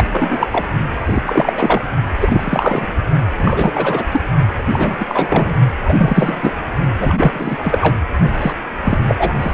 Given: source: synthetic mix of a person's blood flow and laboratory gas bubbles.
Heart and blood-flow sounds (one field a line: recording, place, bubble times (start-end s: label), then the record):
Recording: Doppler ultrasound of blood flow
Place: precordium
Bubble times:
0.00-0.04 s: bubbles
0.12-0.47 s: bubbles
0.52-0.66 s: bubbles
1.06-1.23 s: bubbles
1.25-1.53 s: bubbles
1.56-1.82 s: bubbles
2.21-2.92 s: bubbles
3.38-4.04 s: bubbles
4.12-4.21 s: bubbles
4.71-5.55 s: bubbles
5.85-5.94 s: bubbles
5.97-6.53 s: bubbles
6.99-7.57 s: bubbles
7.62-7.96 s: bubbles
8.40-8.53 s: bubbles
8.85-8.98 s: bubbles
9.08-9.15 s: bubbles
9.19-9.35 s: bubbles
9.41-9.53 s: bubbles
From the record:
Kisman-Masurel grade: 343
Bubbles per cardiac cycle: rolling drumbeat, 9 or more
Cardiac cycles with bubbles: 100%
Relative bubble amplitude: loud (0.450 to 0.775)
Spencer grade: 3 (all of the cardiac periods contain showers or single bubble signals, but not dominating or overriding the cardiac motion signals)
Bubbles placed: only in the low amplitude regions of the cardiac cycle